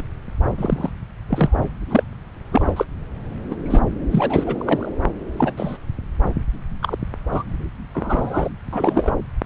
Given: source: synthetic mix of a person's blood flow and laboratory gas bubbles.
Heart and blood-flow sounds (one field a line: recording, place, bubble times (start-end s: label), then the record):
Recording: Doppler ultrasound of blood flow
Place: subclavian vein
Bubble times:
0.00-0.03 s: bubbles
0.58-0.90 s: bubbles
1.28-1.66 s: bubbles
1.90-2.03 s: bubbles
2.51-2.72 s: bubbles
2.76-2.85 s: bubbles
3.50-3.54 s: bubbles
3.65-3.81 s: bubbles
4.11-4.91 s: bubbles
5.37-5.53 s: bubbles
5.57-5.78 s: bubbles
6.82-6.96 s: bubbles
7.32-7.43 s: bubbles
7.93-8.49 s: bubbles
8.72-9.12 s: bubbles
From the record:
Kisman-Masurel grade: 242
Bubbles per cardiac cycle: several, 3 to 8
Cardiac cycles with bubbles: 100%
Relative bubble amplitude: moderate (0.250 to 0.450)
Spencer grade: 3 (all of the cardiac periods contain showers or single bubble signals, but not dominating or overriding the cardiac motion signals)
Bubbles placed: anywhere in the cardiac cycle